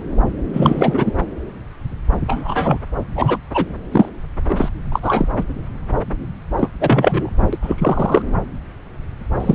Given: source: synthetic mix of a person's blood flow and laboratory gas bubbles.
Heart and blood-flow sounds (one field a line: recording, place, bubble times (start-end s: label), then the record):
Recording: Doppler ultrasound of blood flow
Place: subclavian vein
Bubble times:
0.53-1.11 s: bubbles
2.27-2.78 s: bubbles
3.16-3.38 s: bubbles
3.54-3.66 s: bubbles
3.92-4.09 s: bubbles
4.48-4.69 s: bubbles
4.92-5.00 s: bubbles
5.02-5.28 s: bubbles
5.38-5.44 s: bubbles
6.57-6.69 s: bubbles
6.80-7.29 s: bubbles
7.52-7.58 s: bubbles
7.62-8.22 s: bubbles
9.40-9.55 s: bubbles
From the record:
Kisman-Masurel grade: 233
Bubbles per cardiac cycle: several, 3 to 8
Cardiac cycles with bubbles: 50 to 99%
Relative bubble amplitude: loud (0.450 to 0.775)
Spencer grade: 3 (all of the cardiac periods contain showers or single bubble signals, but not dominating or overriding the cardiac motion signals)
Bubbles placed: anywhere in the cardiac cycle